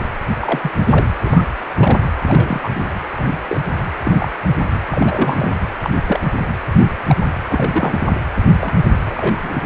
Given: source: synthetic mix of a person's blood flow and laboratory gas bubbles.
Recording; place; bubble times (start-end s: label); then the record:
Doppler ultrasound of blood flow; precordium
0.00-0.08 s: bubbles
0.40-1.07 s: bubbles
1.24-1.45 s: bubbles
1.78-1.97 s: bubbles
2.23-2.69 s: bubbles
2.75-2.83 s: bubbles
3.17-3.39 s: bubbles
3.48-3.60 s: bubbles
4.05-4.29 s: bubbles
4.72-4.83 s: bubbles
4.91-5.51 s: bubbles
5.80-5.90 s: bubbles
6.06-6.29 s: bubbles
6.80-6.91 s: bubbles
7.07-7.16 s: bubbles
7.48-8.08 s: bubbles
8.59-8.76 s: bubbles
9.01-9.63 s: bubbles
From the record:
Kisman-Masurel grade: 242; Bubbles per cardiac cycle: several, 3 to 8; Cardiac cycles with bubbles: 100%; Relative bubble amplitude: moderate (0.250 to 0.450); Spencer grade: 3 (all of the cardiac periods contain showers or single bubble signals, but not dominating or overriding the cardiac motion signals); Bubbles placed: anywhere in the cardiac cycle